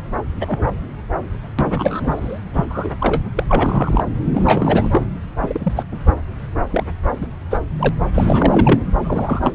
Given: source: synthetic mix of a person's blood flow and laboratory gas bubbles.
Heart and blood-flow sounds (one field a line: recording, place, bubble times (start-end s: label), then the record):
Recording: Doppler ultrasound of blood flow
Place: subclavian vein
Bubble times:
0.40-0.72 s: bubbles
1.58-2.40 s: bubbles
2.53-2.65 s: bubbles
2.69-2.91 s: bubbles
2.98-3.21 s: bubbles
3.35-3.44 s: bubbles
3.48-4.04 s: bubbles
4.33-5.02 s: bubbles
5.43-5.73 s: bubbles
5.76-5.84 s: bubbles
5.92-5.98 s: bubbles
6.71-6.84 s: bubbles
7.21-7.27 s: bubbles
7.50-7.58 s: bubbles
7.79-7.89 s: bubbles
8.14-8.80 s: bubbles
9.04-9.52 s: bubbles
From the record:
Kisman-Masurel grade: 242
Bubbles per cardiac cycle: several, 3 to 8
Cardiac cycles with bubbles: 100%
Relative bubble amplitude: moderate (0.250 to 0.450)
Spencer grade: 3 (all of the cardiac periods contain showers or single bubble signals, but not dominating or overriding the cardiac motion signals)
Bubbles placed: anywhere in the cardiac cycle